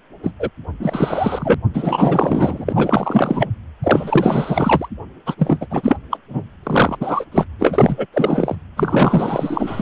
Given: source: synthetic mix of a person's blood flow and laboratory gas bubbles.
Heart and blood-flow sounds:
Doppler ultrasound of blood flow; precordium
0.23-0.32 s: bubbles
0.39-0.50 s: bubbles
0.80-1.54 s: bubbles
1.74-3.48 s: bubbles
3.83-4.88 s: bubbles
5.26-5.35 s: bubbles
5.38-5.67 s: bubbles
5.70-5.96 s: bubbles
6.11-6.17 s: bubbles
6.29-6.42 s: bubbles
6.63-7.25 s: bubbles
7.32-7.46 s: bubbles
7.58-8.06 s: bubbles
8.13-8.55 s: bubbles
8.76-9.82 s: bubbles
From the record:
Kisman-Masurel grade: 444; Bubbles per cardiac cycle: continuous sound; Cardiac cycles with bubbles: 100%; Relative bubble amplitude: maximal (0.775 to 0.999); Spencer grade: 4 (maximum detectable bubble signal sounding continuously throughout systole and diastole of every cardiac period, and overriding the amplitude of the normal cardiac signals); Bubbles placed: anywhere in the cardiac cycle

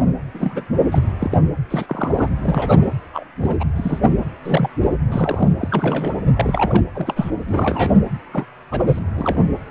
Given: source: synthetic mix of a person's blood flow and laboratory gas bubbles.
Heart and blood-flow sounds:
Doppler ultrasound of blood flow; precordium
0.00-0.05 s: bubbles
0.34-0.64 s: bubbles
0.91-0.98 s: bubbles
1.19-1.38 s: bubbles
1.70-2.28 s: bubbles
2.42-2.85 s: bubbles
3.13-3.24 s: bubbles
3.41-3.56 s: bubbles
3.60-3.63 s: bubbles
3.76-4.11 s: bubbles
4.44-4.68 s: bubbles
4.81-4.92 s: bubbles
5.05-5.49 s: bubbles
5.58-6.15 s: bubbles
6.36-6.83 s: bubbles
6.94-7.31 s: bubbles
7.47-7.94 s: bubbles
8.31-8.45 s: bubbles
8.71-8.99 s: bubbles
9.15-9.47 s: bubbles
From the record:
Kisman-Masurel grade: 242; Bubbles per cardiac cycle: several, 3 to 8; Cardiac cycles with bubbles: 100%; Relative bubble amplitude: moderate (0.250 to 0.450); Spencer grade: 3 (all of the cardiac periods contain showers or single bubble signals, but not dominating or overriding the cardiac motion signals); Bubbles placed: anywhere in the cardiac cycle

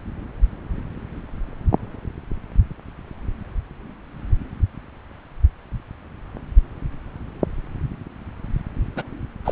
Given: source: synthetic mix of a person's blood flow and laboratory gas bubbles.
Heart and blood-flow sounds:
Doppler ultrasound of blood flow; subclavian vein
8.96-9.03 s: bubbles
9.45-9.52 s: bubbles
From the record:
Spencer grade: 1 (occasional bubble signal discernible with the cardiac motion signal, with majority of cardiac periods free of bubbles); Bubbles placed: anywhere in the cardiac cycle

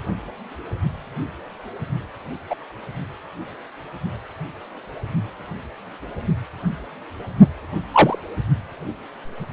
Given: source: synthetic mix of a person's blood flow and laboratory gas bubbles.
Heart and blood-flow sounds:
Doppler ultrasound of blood flow; precordium
2.50-2.55 s: bubbles
7.92-8.18 s: bubbles
From the record:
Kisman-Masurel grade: 123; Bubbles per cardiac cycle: 1 to 2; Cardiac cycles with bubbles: 10 to 50%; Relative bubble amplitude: loud (0.450 to 0.775); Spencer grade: 2 (many but less than half of the cardiac periods contain bubble signals, singularly or in groups); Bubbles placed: only in the low amplitude regions of the cardiac cycle

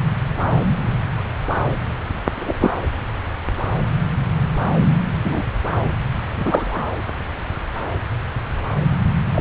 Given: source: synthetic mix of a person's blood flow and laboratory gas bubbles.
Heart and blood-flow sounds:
Doppler ultrasound of blood flow; subclavian vein
2.38-2.71 s: bubbles
5.25-5.43 s: bubbles
6.35-6.82 s: bubbles
9.34-9.41 s: bubbles
From the record:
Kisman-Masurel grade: 123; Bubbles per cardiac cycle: 1 to 2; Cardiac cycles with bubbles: 10 to 50%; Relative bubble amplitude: loud (0.450 to 0.775); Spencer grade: 2 (many but less than half of the cardiac periods contain bubble signals, singularly or in groups); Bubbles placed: anywhere in the cardiac cycle

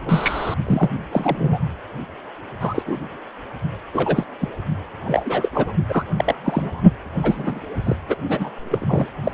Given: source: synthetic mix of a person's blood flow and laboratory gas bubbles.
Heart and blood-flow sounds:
Doppler ultrasound of blood flow; precordium
0.00-0.54 s: bubbles
0.66-0.90 s: bubbles
1.12-1.58 s: bubbles
2.60-2.83 s: bubbles
2.86-3.00 s: bubbles
3.94-4.24 s: bubbles
4.40-4.49 s: bubbles
5.04-5.49 s: bubbles
5.54-5.73 s: bubbles
5.88-6.03 s: bubbles
6.17-6.35 s: bubbles
6.43-6.81 s: bubbles
7.22-7.60 s: bubbles
7.84-7.96 s: bubbles
8.07-8.15 s: bubbles
8.29-8.50 s: bubbles
8.71-9.11 s: bubbles
9.23-9.31 s: bubbles
From the record:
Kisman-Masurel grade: 242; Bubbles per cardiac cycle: several, 3 to 8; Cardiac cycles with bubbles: 100%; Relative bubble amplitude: moderate (0.250 to 0.450); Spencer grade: 3 (all of the cardiac periods contain showers or single bubble signals, but not dominating or overriding the cardiac motion signals); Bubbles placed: only in the low amplitude regions of the cardiac cycle

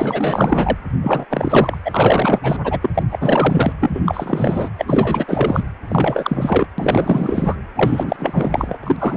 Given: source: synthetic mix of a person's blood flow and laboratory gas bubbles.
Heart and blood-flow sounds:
Doppler ultrasound of blood flow; precordium
0.00-0.78 s: bubbles
1.02-1.25 s: bubbles
1.29-1.77 s: bubbles
1.85-2.57 s: bubbles
2.64-2.79 s: bubbles
2.82-2.90 s: bubbles
2.94-3.03 s: bubbles
3.10-3.73 s: bubbles
3.80-4.00 s: bubbles
4.04-4.69 s: bubbles
4.78-5.25 s: bubbles
5.27-5.63 s: bubbles
5.88-6.67 s: bubbles
6.78-7.56 s: bubbles
7.75-8.16 s: bubbles
8.19-8.78 s: bubbles
8.83-9.16 s: bubbles
From the record:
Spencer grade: 4 (maximum detectable bubble signal sounding continuously throughout systole and diastole of every cardiac period, and overriding the amplitude of the normal cardiac signals); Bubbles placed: anywhere in the cardiac cycle

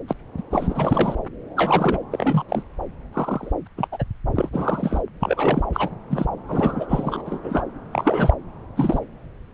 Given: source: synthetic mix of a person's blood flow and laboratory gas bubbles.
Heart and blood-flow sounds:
Doppler ultrasound of blood flow; subclavian vein
0.07-0.13 s: bubbles
0.37-0.42 s: bubbles
0.50-1.15 s: bubbles
1.56-1.98 s: bubbles
2.12-2.44 s: bubbles
2.48-2.62 s: bubbles
3.12-3.52 s: bubbles
3.65-3.68 s: bubbles
3.77-3.88 s: bubbles
3.92-4.04 s: bubbles
4.34-4.49 s: bubbles
4.52-5.01 s: bubbles
5.21-5.63 s: bubbles
5.72-5.89 s: bubbles
6.09-6.26 s: bubbles
6.48-6.86 s: bubbles
6.88-7.22 s: bubbles
7.25-7.40 s: bubbles
7.43-7.64 s: bubbles
7.92-8.34 s: bubbles
8.75-9.00 s: bubbles
From the record:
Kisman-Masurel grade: 242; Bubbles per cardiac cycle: several, 3 to 8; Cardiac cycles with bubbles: 100%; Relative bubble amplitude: moderate (0.250 to 0.450); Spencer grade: 3 (all of the cardiac periods contain showers or single bubble signals, but not dominating or overriding the cardiac motion signals); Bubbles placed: anywhere in the cardiac cycle

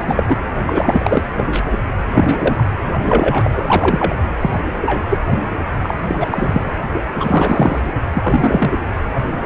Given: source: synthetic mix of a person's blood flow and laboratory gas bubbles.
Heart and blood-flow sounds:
Doppler ultrasound of blood flow; precordium
0.00-0.23 s: bubbles
0.28-0.39 s: bubbles
0.66-1.23 s: bubbles
1.37-1.44 s: bubbles
1.52-1.60 s: bubbles
2.14-2.67 s: bubbles
3.02-4.14 s: bubbles
4.40-4.60 s: bubbles
4.81-5.19 s: bubbles
5.30-5.39 s: bubbles
5.83-5.97 s: bubbles
6.03-6.15 s: bubbles
6.20-6.74 s: bubbles
7.20-7.81 s: bubbles
8.12-8.75 s: bubbles
From the record:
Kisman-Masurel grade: 243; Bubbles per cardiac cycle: several, 3 to 8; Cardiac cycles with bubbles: 100%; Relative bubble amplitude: loud (0.450 to 0.775); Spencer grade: 3 (all of the cardiac periods contain showers or single bubble signals, but not dominating or overriding the cardiac motion signals); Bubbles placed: anywhere in the cardiac cycle

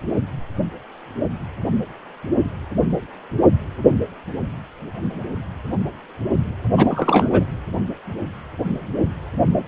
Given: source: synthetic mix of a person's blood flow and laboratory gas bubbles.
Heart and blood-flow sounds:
Doppler ultrasound of blood flow; precordium
6.76-7.43 s: bubbles
From the record:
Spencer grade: 1 (occasional bubble signal discernible with the cardiac motion signal, with majority of cardiac periods free of bubbles); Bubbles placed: anywhere in the cardiac cycle

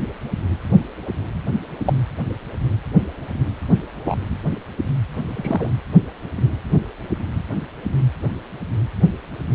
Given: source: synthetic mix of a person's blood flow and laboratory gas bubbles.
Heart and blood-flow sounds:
Doppler ultrasound of blood flow; precordium
1.85-1.98 s: bubbles
4.06-4.17 s: bubbles
5.36-5.72 s: bubbles
From the record:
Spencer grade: 2 (many but less than half of the cardiac periods contain bubble signals, singularly or in groups); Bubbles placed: anywhere in the cardiac cycle

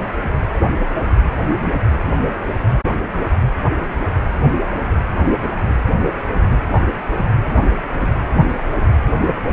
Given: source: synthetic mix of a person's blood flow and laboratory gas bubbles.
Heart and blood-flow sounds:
Doppler ultrasound of blood flow; precordium
no bubbles
From the record:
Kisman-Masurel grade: 000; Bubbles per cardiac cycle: 0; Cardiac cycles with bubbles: 0%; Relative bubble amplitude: no bubbles discernible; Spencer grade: 0 (complete lack of bubble signals)

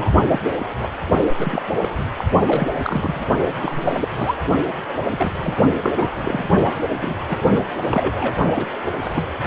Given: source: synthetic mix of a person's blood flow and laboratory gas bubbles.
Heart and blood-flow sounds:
Doppler ultrasound of blood flow; precordium
0.00-0.11 s: bubbles
0.28-0.40 s: bubbles
0.59-0.65 s: bubbles
0.80-0.89 s: bubbles
1.37-1.62 s: bubbles
1.81-1.89 s: bubbles
2.17-2.25 s: bubbles
2.46-3.21 s: bubbles
3.62-3.95 s: bubbles
4.00-4.08 s: bubbles
4.14-4.36 s: bubbles
4.68-4.73 s: bubbles
5.11-5.31 s: bubbles
5.35-5.54 s: bubbles
5.82-6.09 s: bubbles
6.14-6.44 s: bubbles
7.01-7.16 s: bubbles
7.27-7.38 s: bubbles
7.53-7.62 s: bubbles
7.87-8.35 s: bubbles
8.55-8.65 s: bubbles
9.01-9.23 s: bubbles
From the record:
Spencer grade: 3 (all of the cardiac periods contain showers or single bubble signals, but not dominating or overriding the cardiac motion signals); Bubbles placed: only in the low amplitude regions of the cardiac cycle

